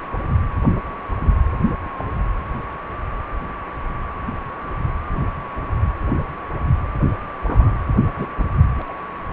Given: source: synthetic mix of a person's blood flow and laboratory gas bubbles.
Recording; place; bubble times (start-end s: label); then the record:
Doppler ultrasound of blood flow; precordium
1.98-2.04 s: bubbles
7.47-7.79 s: bubbles
8.18-8.28 s: bubbles
8.38-8.43 s: bubbles
8.74-8.83 s: bubbles
8.88-8.92 s: bubbles
From the record:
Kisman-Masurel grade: 121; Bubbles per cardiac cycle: 1 to 2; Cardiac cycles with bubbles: 10 to 50%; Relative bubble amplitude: barely perceptible (0.100 to 0.250); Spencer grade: 2 (many but less than half of the cardiac periods contain bubble signals, singularly or in groups); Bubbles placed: anywhere in the cardiac cycle